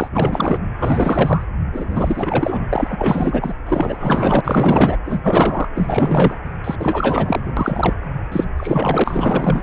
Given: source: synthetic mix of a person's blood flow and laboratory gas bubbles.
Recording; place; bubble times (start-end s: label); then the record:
Doppler ultrasound of blood flow; precordium
0.00-0.58 s: bubbles
0.79-1.44 s: bubbles
1.73-2.65 s: bubbles
2.71-3.54 s: bubbles
3.65-4.41 s: bubbles
4.44-4.98 s: bubbles
5.04-5.69 s: bubbles
5.75-6.38 s: bubbles
6.64-6.76 s: bubbles
6.79-7.52 s: bubbles
7.57-7.94 s: bubbles
8.31-8.45 s: bubbles
8.56-9.62 s: bubbles
From the record:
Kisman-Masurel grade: 444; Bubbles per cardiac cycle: continuous sound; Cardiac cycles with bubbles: 100%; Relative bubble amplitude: maximal (0.775 to 0.999); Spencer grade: 4 (maximum detectable bubble signal sounding continuously throughout systole and diastole of every cardiac period, and overriding the amplitude of the normal cardiac signals); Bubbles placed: anywhere in the cardiac cycle